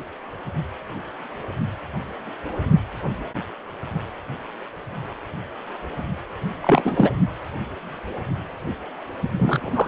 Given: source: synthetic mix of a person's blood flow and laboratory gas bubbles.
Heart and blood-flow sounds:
Doppler ultrasound of blood flow; precordium
6.62-7.11 s: bubbles
9.39-9.88 s: bubbles
From the record:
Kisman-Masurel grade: 222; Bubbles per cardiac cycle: several, 3 to 8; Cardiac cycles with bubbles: 10 to 50%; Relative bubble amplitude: moderate (0.250 to 0.450); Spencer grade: 2 (many but less than half of the cardiac periods contain bubble signals, singularly or in groups); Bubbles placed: only in the low amplitude regions of the cardiac cycle

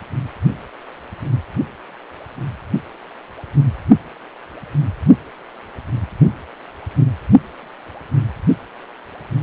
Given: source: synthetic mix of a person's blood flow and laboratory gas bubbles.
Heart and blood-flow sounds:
Doppler ultrasound of blood flow; precordium
no bubbles
From the record:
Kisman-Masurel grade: 000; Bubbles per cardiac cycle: 0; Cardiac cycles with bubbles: 0%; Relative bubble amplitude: no bubbles discernible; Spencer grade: 0 (complete lack of bubble signals)

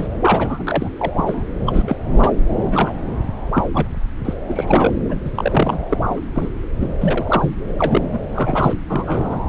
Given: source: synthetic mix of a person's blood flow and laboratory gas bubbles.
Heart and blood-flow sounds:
Doppler ultrasound of blood flow; subclavian vein
0.00-0.08 s: bubbles
0.21-0.64 s: bubbles
0.67-0.90 s: bubbles
0.99-1.12 s: bubbles
1.16-1.43 s: bubbles
1.67-1.97 s: bubbles
2.12-2.36 s: bubbles
2.66-2.93 s: bubbles
3.54-3.67 s: bubbles
3.74-3.88 s: bubbles
4.25-4.33 s: bubbles
4.49-4.93 s: bubbles
5.09-5.16 s: bubbles
5.25-5.31 s: bubbles
5.35-5.79 s: bubbles
5.91-5.97 s: bubbles
6.01-6.20 s: bubbles
6.35-6.48 s: bubbles
6.80-6.87 s: bubbles
7.00-7.54 s: bubbles
7.79-8.02 s: bubbles
8.12-8.19 s: bubbles
8.33-8.73 s: bubbles
8.89-9.37 s: bubbles
From the record:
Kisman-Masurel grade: 342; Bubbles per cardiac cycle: rolling drumbeat, 9 or more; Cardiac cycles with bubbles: 100%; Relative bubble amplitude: moderate (0.250 to 0.450); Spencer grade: 3 (all of the cardiac periods contain showers or single bubble signals, but not dominating or overriding the cardiac motion signals); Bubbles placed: anywhere in the cardiac cycle

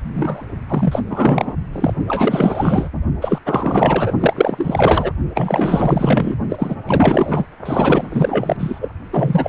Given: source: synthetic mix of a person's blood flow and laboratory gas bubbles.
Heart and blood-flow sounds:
Doppler ultrasound of blood flow; precordium
0.14-0.45 s: bubbles
0.68-1.02 s: bubbles
1.07-1.54 s: bubbles
1.72-1.94 s: bubbles
2.08-2.90 s: bubbles
3.21-3.40 s: bubbles
3.45-4.13 s: bubbles
4.20-5.12 s: bubbles
5.34-6.35 s: bubbles
6.49-6.76 s: bubbles
6.87-7.45 s: bubbles
7.65-8.89 s: bubbles
9.12-9.49 s: bubbles
From the record:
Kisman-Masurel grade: 444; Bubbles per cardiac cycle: continuous sound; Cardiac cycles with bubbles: 100%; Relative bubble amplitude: maximal (0.775 to 0.999); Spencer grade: 4 (maximum detectable bubble signal sounding continuously throughout systole and diastole of every cardiac period, and overriding the amplitude of the normal cardiac signals); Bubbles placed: only in the low amplitude regions of the cardiac cycle

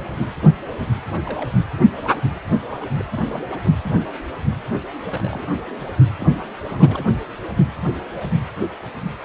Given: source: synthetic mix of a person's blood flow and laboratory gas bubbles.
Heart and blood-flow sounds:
Doppler ultrasound of blood flow; precordium
1.11-1.21 s: bubbles
1.23-1.51 s: bubbles
2.81-3.43 s: bubbles
3.52-3.59 s: bubbles
3.64-3.72 s: bubbles
3.81-4.05 s: bubbles
5.05-5.55 s: bubbles
6.21-6.27 s: bubbles
6.65-7.14 s: bubbles
From the record:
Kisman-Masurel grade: 221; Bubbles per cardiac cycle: several, 3 to 8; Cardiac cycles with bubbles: 10 to 50%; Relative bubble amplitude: barely perceptible (0.100 to 0.250); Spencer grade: 2 (many but less than half of the cardiac periods contain bubble signals, singularly or in groups); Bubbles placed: anywhere in the cardiac cycle

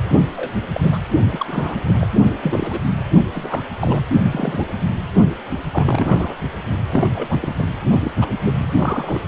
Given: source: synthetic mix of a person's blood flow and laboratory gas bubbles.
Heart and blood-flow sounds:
Doppler ultrasound of blood flow; precordium
0.36-0.53 s: bubbles
0.73-0.99 s: bubbles
1.29-1.75 s: bubbles
1.88-2.07 s: bubbles
2.42-2.80 s: bubbles
3.31-3.66 s: bubbles
3.79-4.02 s: bubbles
4.22-4.91 s: bubbles
5.71-6.37 s: bubbles
6.91-7.55 s: bubbles
7.58-7.63 s: bubbles
8.04-8.12 s: bubbles
8.20-8.25 s: bubbles
8.45-8.67 s: bubbles
8.77-9.19 s: bubbles
From the record:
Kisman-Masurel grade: 232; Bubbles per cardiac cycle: several, 3 to 8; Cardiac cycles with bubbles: 50 to 99%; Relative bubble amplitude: moderate (0.250 to 0.450); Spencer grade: 3 (all of the cardiac periods contain showers or single bubble signals, but not dominating or overriding the cardiac motion signals); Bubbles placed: only in the low amplitude regions of the cardiac cycle

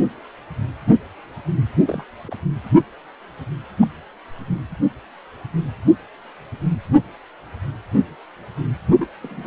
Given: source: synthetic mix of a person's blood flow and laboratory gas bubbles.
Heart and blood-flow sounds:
Doppler ultrasound of blood flow; precordium
1.84-2.04 s: bubbles
2.27-2.37 s: bubbles
3.79-3.87 s: bubbles
5.87-5.92 s: bubbles
8.94-9.07 s: bubbles
9.21-9.47 s: bubbles
From the record:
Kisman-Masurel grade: 121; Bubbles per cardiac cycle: 1 to 2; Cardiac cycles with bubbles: 10 to 50%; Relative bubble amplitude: barely perceptible (0.100 to 0.250); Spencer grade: 2 (many but less than half of the cardiac periods contain bubble signals, singularly or in groups); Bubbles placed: anywhere in the cardiac cycle

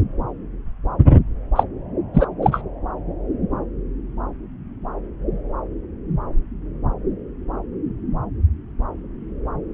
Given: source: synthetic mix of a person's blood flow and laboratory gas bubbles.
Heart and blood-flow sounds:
Doppler ultrasound of blood flow; subclavian vein
1.56-1.64 s: bubbles
2.13-2.26 s: bubbles
2.42-2.61 s: bubbles
From the record:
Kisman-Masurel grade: 213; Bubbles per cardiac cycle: several, 3 to 8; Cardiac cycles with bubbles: 1 to 10%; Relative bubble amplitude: loud (0.450 to 0.775); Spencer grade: 1 (occasional bubble signal discernible with the cardiac motion signal, with majority of cardiac periods free of bubbles); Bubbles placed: anywhere in the cardiac cycle

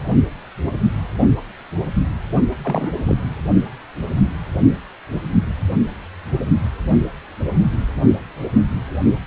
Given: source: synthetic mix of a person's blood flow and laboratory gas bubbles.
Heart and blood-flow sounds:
Doppler ultrasound of blood flow; precordium
2.63-2.90 s: bubbles
3.06-3.18 s: bubbles
From the record:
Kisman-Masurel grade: 212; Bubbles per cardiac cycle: several, 3 to 8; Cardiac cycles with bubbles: 1 to 10%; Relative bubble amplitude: moderate (0.250 to 0.450); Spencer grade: 1 (occasional bubble signal discernible with the cardiac motion signal, with majority of cardiac periods free of bubbles); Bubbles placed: only in the low amplitude regions of the cardiac cycle

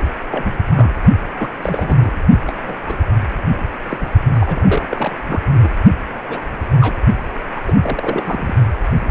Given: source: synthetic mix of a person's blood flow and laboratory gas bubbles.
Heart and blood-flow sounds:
Doppler ultrasound of blood flow; precordium
0.30-0.65 s: bubbles
0.75-1.03 s: bubbles
1.38-1.50 s: bubbles
1.61-2.22 s: bubbles
2.46-2.76 s: bubbles
2.84-2.97 s: bubbles
3.89-4.07 s: bubbles
4.33-5.12 s: bubbles
5.28-5.41 s: bubbles
5.52-5.75 s: bubbles
6.29-6.42 s: bubbles
6.81-6.99 s: bubbles
7.54-7.60 s: bubbles
7.66-7.75 s: bubbles
7.82-8.55 s: bubbles
From the record:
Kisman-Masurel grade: 232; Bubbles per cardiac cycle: several, 3 to 8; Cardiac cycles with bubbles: 50 to 99%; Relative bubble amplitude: moderate (0.250 to 0.450); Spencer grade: 3 (all of the cardiac periods contain showers or single bubble signals, but not dominating or overriding the cardiac motion signals); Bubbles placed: only in the low amplitude regions of the cardiac cycle

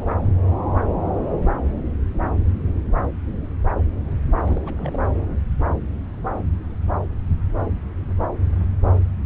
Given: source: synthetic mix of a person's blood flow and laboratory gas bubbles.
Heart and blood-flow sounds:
Doppler ultrasound of blood flow; subclavian vein
4.46-5.00 s: bubbles
From the record:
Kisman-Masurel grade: 211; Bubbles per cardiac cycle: several, 3 to 8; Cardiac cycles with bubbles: 1 to 10%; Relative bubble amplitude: barely perceptible (0.100 to 0.250); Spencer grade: 1 (occasional bubble signal discernible with the cardiac motion signal, with majority of cardiac periods free of bubbles); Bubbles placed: anywhere in the cardiac cycle

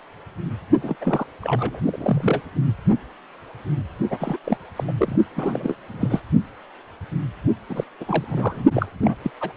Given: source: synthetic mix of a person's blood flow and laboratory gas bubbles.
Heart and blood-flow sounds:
Doppler ultrasound of blood flow; precordium
0.82-0.96 s: bubbles
1.01-1.26 s: bubbles
1.41-1.80 s: bubbles
1.86-2.42 s: bubbles
4.10-4.37 s: bubbles
4.44-4.57 s: bubbles
4.76-4.84 s: bubbles
4.87-4.91 s: bubbles
4.98-5.16 s: bubbles
5.36-5.75 s: bubbles
5.93-6.20 s: bubbles
7.69-7.84 s: bubbles
8.00-8.04 s: bubbles
8.08-8.64 s: bubbles
8.74-9.16 s: bubbles
9.23-9.31 s: bubbles
9.40-9.52 s: bubbles
From the record:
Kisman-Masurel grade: 332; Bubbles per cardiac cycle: rolling drumbeat, 9 or more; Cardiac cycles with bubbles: 50 to 99%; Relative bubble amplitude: moderate (0.250 to 0.450); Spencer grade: 3 (all of the cardiac periods contain showers or single bubble signals, but not dominating or overriding the cardiac motion signals); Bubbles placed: only in the low amplitude regions of the cardiac cycle

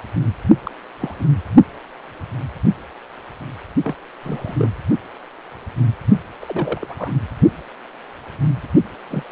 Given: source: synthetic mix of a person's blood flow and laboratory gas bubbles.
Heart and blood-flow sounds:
Doppler ultrasound of blood flow; precordium
0.66-0.71 s: bubbles
0.99-1.15 s: bubbles
1.18-1.26 s: bubbles
3.83-3.94 s: bubbles
4.23-4.56 s: bubbles
4.58-4.70 s: bubbles
6.41-6.87 s: bubbles
6.89-7.12 s: bubbles
9.10-9.23 s: bubbles
From the record:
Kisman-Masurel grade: 221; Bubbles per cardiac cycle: several, 3 to 8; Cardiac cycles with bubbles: 10 to 50%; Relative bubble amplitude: barely perceptible (0.100 to 0.250); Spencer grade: 2 (many but less than half of the cardiac periods contain bubble signals, singularly or in groups); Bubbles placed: only in the low amplitude regions of the cardiac cycle

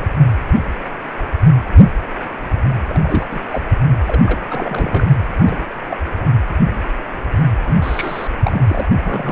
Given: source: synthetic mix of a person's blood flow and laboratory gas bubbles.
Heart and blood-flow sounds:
Doppler ultrasound of blood flow; precordium
0.00-0.05 s: bubbles
2.90-3.26 s: bubbles
3.30-3.40 s: bubbles
3.50-3.65 s: bubbles
4.07-5.07 s: bubbles
5.37-5.64 s: bubbles
5.89-5.97 s: bubbles
7.64-7.76 s: bubbles
7.82-8.28 s: bubbles
8.44-8.61 s: bubbles
8.69-8.87 s: bubbles
8.97-9.32 s: bubbles
From the record:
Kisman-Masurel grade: 232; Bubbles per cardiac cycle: several, 3 to 8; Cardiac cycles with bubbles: 50 to 99%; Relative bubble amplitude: moderate (0.250 to 0.450); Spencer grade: 3 (all of the cardiac periods contain showers or single bubble signals, but not dominating or overriding the cardiac motion signals); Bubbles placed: anywhere in the cardiac cycle

